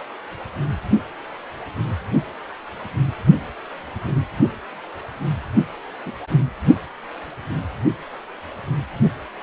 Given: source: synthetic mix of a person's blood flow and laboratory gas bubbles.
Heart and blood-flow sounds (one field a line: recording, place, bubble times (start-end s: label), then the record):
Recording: Doppler ultrasound of blood flow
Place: precordium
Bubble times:
5.55-5.65 s: bubbles
6.05-6.12 s: bubbles
From the record:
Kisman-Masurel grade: 112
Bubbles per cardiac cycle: 1 to 2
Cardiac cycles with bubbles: 1 to 10%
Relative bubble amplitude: moderate (0.250 to 0.450)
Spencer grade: 1 (occasional bubble signal discernible with the cardiac motion signal, with majority of cardiac periods free of bubbles)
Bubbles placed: only in the low amplitude regions of the cardiac cycle